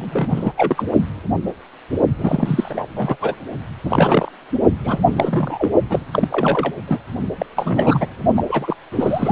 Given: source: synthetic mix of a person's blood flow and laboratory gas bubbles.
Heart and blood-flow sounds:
Doppler ultrasound of blood flow; precordium
0.00-0.52 s: bubbles
0.56-0.84 s: bubbles
2.19-2.88 s: bubbles
2.96-3.17 s: bubbles
3.21-3.35 s: bubbles
3.82-4.32 s: bubbles
4.84-5.70 s: bubbles
5.89-6.05 s: bubbles
6.11-6.28 s: bubbles
6.30-6.72 s: bubbles
6.87-6.98 s: bubbles
7.38-7.46 s: bubbles
7.54-8.08 s: bubbles
8.36-8.45 s: bubbles
8.48-8.75 s: bubbles
8.91-9.32 s: bubbles
From the record:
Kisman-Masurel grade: 333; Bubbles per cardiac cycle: rolling drumbeat, 9 or more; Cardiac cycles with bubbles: 50 to 99%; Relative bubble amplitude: loud (0.450 to 0.775); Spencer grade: 3 (all of the cardiac periods contain showers or single bubble signals, but not dominating or overriding the cardiac motion signals); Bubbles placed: only in the low amplitude regions of the cardiac cycle

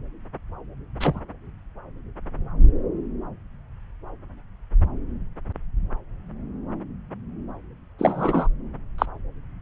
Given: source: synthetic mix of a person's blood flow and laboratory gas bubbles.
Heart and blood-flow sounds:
Doppler ultrasound of blood flow; subclavian vein
1.00-1.20 s: bubbles
7.99-8.47 s: bubbles
8.98-9.06 s: bubbles
From the record:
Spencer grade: 2 (many but less than half of the cardiac periods contain bubble signals, singularly or in groups); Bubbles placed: anywhere in the cardiac cycle

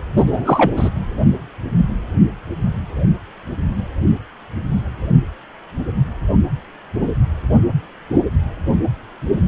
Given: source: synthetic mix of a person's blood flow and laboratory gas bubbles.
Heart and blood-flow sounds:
Doppler ultrasound of blood flow; precordium
0.16-0.24 s: bubbles
0.26-0.72 s: bubbles
0.77-0.90 s: bubbles
From the record:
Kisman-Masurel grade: 213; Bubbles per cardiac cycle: several, 3 to 8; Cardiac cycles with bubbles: 1 to 10%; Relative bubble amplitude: loud (0.450 to 0.775); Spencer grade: 1 (occasional bubble signal discernible with the cardiac motion signal, with majority of cardiac periods free of bubbles); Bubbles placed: anywhere in the cardiac cycle

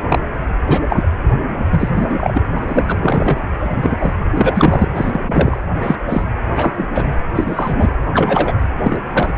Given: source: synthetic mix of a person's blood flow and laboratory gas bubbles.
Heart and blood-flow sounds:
Doppler ultrasound of blood flow; precordium
0.09-0.22 s: bubbles
0.64-1.08 s: bubbles
1.71-2.42 s: bubbles
2.56-3.41 s: bubbles
3.59-4.13 s: bubbles
4.30-4.91 s: bubbles
4.95-5.20 s: bubbles
5.26-5.60 s: bubbles
5.82-5.96 s: bubbles
6.07-6.25 s: bubbles
6.56-7.18 s: bubbles
7.35-7.94 s: bubbles
8.00-8.59 s: bubbles
8.77-9.00 s: bubbles
9.14-9.32 s: bubbles
From the record:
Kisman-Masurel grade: 243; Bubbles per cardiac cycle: several, 3 to 8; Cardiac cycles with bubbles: 100%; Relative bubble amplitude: loud (0.450 to 0.775); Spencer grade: 3 (all of the cardiac periods contain showers or single bubble signals, but not dominating or overriding the cardiac motion signals); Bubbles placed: anywhere in the cardiac cycle

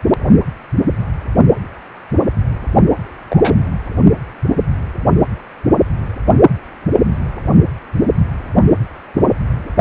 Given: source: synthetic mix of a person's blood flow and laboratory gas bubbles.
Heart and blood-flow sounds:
Doppler ultrasound of blood flow; precordium
3.30-3.55 s: bubbles
From the record:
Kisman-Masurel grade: 123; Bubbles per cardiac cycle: 1 to 2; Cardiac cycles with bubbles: 10 to 50%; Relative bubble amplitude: loud (0.450 to 0.775); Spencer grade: 2 (many but less than half of the cardiac periods contain bubble signals, singularly or in groups); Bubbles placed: only in the low amplitude regions of the cardiac cycle

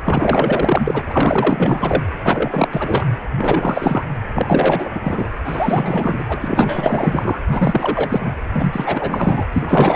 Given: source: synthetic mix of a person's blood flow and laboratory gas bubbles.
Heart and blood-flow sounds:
Doppler ultrasound of blood flow; precordium
0.04-1.02 s: bubbles
1.09-2.03 s: bubbles
2.22-2.69 s: bubbles
2.72-3.06 s: bubbles
3.38-4.04 s: bubbles
4.35-4.91 s: bubbles
4.95-5.00 s: bubbles
5.04-5.29 s: bubbles
5.45-7.40 s: bubbles
7.48-8.34 s: bubbles
8.53-9.45 s: bubbles
9.53-9.96 s: bubbles
From the record:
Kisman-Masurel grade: 444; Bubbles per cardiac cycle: continuous sound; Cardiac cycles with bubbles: 100%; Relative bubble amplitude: maximal (0.775 to 0.999); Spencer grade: 4 (maximum detectable bubble signal sounding continuously throughout systole and diastole of every cardiac period, and overriding the amplitude of the normal cardiac signals); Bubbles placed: anywhere in the cardiac cycle

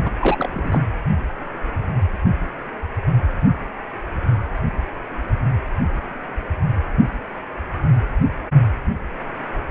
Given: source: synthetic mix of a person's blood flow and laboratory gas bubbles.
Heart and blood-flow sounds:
Doppler ultrasound of blood flow; precordium
0.04-0.10 s: bubbles
0.21-0.49 s: bubbles
0.53-0.80 s: bubbles
From the record:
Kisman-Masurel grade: 222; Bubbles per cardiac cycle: several, 3 to 8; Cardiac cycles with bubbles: 10 to 50%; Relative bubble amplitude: moderate (0.250 to 0.450); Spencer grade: 2 (many but less than half of the cardiac periods contain bubble signals, singularly or in groups); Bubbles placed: anywhere in the cardiac cycle

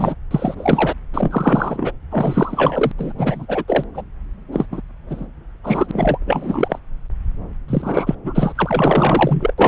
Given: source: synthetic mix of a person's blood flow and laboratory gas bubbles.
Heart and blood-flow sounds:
Doppler ultrasound of blood flow; subclavian vein
0.00-0.15 s: bubbles
0.31-0.93 s: bubbles
1.12-1.91 s: bubbles
2.10-2.92 s: bubbles
2.98-3.12 s: bubbles
3.17-3.64 s: bubbles
3.68-3.84 s: bubbles
3.93-4.02 s: bubbles
4.52-4.66 s: bubbles
4.71-4.80 s: bubbles
5.09-5.26 s: bubbles
5.63-6.17 s: bubbles
6.26-6.79 s: bubbles
7.68-8.15 s: bubbles
8.23-8.52 s: bubbles
8.55-9.53 s: bubbles
9.57-9.68 s: bubbles
From the record:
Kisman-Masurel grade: 343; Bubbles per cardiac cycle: rolling drumbeat, 9 or more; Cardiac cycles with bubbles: 100%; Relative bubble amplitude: loud (0.450 to 0.775); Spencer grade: 3 (all of the cardiac periods contain showers or single bubble signals, but not dominating or overriding the cardiac motion signals); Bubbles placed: anywhere in the cardiac cycle

